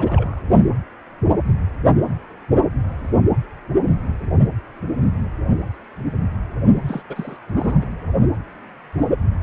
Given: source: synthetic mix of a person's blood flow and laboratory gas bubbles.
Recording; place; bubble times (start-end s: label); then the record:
Doppler ultrasound of blood flow; precordium
0.00-0.42 s: bubbles
6.82-7.02 s: bubbles
7.09-7.37 s: bubbles
7.54-7.87 s: bubbles
From the record:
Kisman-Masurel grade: 221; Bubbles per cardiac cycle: several, 3 to 8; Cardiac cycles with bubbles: 10 to 50%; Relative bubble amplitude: barely perceptible (0.100 to 0.250); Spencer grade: 2 (many but less than half of the cardiac periods contain bubble signals, singularly or in groups); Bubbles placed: only in the low amplitude regions of the cardiac cycle